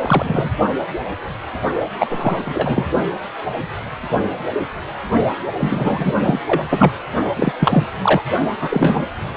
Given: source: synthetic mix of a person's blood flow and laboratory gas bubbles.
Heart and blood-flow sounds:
Doppler ultrasound of blood flow; precordium
0.00-0.49 s: bubbles
1.99-2.91 s: bubbles
5.57-6.39 s: bubbles
6.46-6.61 s: bubbles
6.69-6.92 s: bubbles
7.36-7.52 s: bubbles
7.59-7.88 s: bubbles
8.01-8.21 s: bubbles
8.59-9.04 s: bubbles
From the record:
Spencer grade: 3 (all of the cardiac periods contain showers or single bubble signals, but not dominating or overriding the cardiac motion signals); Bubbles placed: only in the low amplitude regions of the cardiac cycle

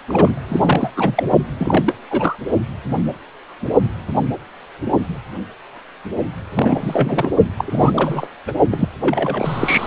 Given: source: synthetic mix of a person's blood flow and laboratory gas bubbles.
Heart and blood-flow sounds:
Doppler ultrasound of blood flow; precordium
0.09-0.41 s: bubbles
0.48-0.91 s: bubbles
0.96-1.23 s: bubbles
1.59-1.95 s: bubbles
2.10-2.36 s: bubbles
6.55-7.29 s: bubbles
7.58-8.27 s: bubbles
8.47-8.53 s: bubbles
8.71-8.89 s: bubbles
9.01-9.87 s: bubbles
From the record:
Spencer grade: 3 (all of the cardiac periods contain showers or single bubble signals, but not dominating or overriding the cardiac motion signals); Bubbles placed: only in the low amplitude regions of the cardiac cycle

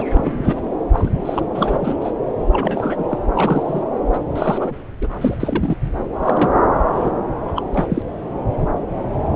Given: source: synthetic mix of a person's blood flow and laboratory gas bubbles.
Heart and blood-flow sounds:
Doppler ultrasound of blood flow; subclavian vein
0.00-0.07 s: bubbles
0.15-0.61 s: bubbles
0.93-1.09 s: bubbles
1.25-1.48 s: bubbles
1.54-1.78 s: bubbles
1.81-1.97 s: bubbles
2.00-2.12 s: bubbles
2.51-3.04 s: bubbles
3.08-3.17 s: bubbles
3.35-3.84 s: bubbles
4.13-4.18 s: bubbles
4.35-4.82 s: bubbles
5.01-5.07 s: bubbles
5.21-5.36 s: bubbles
5.39-5.75 s: bubbles
6.15-6.55 s: bubbles
6.92-7.09 s: bubbles
7.47-7.63 s: bubbles
7.74-8.02 s: bubbles
From the record:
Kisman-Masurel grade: 232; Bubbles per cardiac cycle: several, 3 to 8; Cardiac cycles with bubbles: 50 to 99%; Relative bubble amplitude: moderate (0.250 to 0.450); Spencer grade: 3 (all of the cardiac periods contain showers or single bubble signals, but not dominating or overriding the cardiac motion signals); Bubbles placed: anywhere in the cardiac cycle

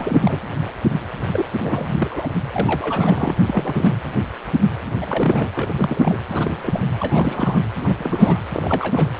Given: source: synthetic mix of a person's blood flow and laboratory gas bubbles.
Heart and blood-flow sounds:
Doppler ultrasound of blood flow; precordium
0.00-0.40 s: bubbles
1.32-1.51 s: bubbles
1.64-2.27 s: bubbles
2.47-3.35 s: bubbles
3.46-3.97 s: bubbles
4.94-5.49 s: bubbles
5.55-5.73 s: bubbles
5.78-6.18 s: bubbles
6.28-6.80 s: bubbles
6.99-7.61 s: bubbles
7.80-7.95 s: bubbles
7.98-8.41 s: bubbles
8.52-9.12 s: bubbles
From the record:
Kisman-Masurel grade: 332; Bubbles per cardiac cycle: rolling drumbeat, 9 or more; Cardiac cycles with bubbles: 50 to 99%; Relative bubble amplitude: moderate (0.250 to 0.450); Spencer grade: 3 (all of the cardiac periods contain showers or single bubble signals, but not dominating or overriding the cardiac motion signals); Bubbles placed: anywhere in the cardiac cycle

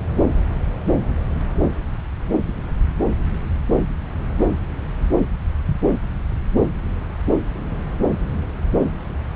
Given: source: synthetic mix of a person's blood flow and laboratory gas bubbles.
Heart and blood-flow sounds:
Doppler ultrasound of blood flow; subclavian vein
no bubbles
From the record:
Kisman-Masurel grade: 000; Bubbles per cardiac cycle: 0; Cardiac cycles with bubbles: 0%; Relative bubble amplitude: no bubbles discernible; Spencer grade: 0 (complete lack of bubble signals)

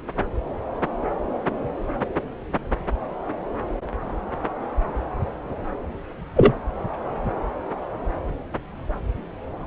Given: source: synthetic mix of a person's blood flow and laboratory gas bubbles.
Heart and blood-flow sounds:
Doppler ultrasound of blood flow; subclavian vein
6.36-6.52 s: bubbles
From the record:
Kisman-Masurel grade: 113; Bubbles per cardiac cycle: 1 to 2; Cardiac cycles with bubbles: 1 to 10%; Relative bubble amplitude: loud (0.450 to 0.775); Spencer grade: 1 (occasional bubble signal discernible with the cardiac motion signal, with majority of cardiac periods free of bubbles); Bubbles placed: anywhere in the cardiac cycle

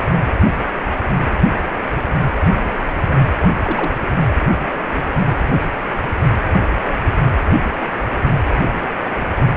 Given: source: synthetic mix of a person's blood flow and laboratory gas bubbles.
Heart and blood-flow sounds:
Doppler ultrasound of blood flow; precordium
2.36-2.44 s: bubbles
3.62-3.92 s: bubbles
From the record:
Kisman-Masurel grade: 122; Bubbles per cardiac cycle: 1 to 2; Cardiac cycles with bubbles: 10 to 50%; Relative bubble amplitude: moderate (0.250 to 0.450); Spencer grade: 2 (many but less than half of the cardiac periods contain bubble signals, singularly or in groups); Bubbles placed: anywhere in the cardiac cycle

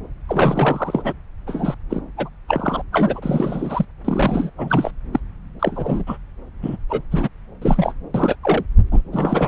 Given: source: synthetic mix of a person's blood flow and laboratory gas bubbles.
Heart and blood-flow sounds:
Doppler ultrasound of blood flow; subclavian vein
0.29-1.13 s: bubbles
1.46-1.75 s: bubbles
1.90-2.01 s: bubbles
2.17-2.29 s: bubbles
2.48-2.82 s: bubbles
2.92-3.85 s: bubbles
4.04-4.50 s: bubbles
4.58-4.91 s: bubbles
5.12-5.20 s: bubbles
5.59-6.04 s: bubbles
6.06-6.17 s: bubbles
6.62-6.77 s: bubbles
6.88-7.02 s: bubbles
7.11-7.29 s: bubbles
7.62-7.93 s: bubbles
8.14-8.36 s: bubbles
8.43-8.64 s: bubbles
8.92-9.02 s: bubbles
9.12-9.48 s: bubbles
From the record:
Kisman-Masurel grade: 342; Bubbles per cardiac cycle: rolling drumbeat, 9 or more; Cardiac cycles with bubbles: 100%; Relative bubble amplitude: moderate (0.250 to 0.450); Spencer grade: 3 (all of the cardiac periods contain showers or single bubble signals, but not dominating or overriding the cardiac motion signals); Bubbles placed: anywhere in the cardiac cycle

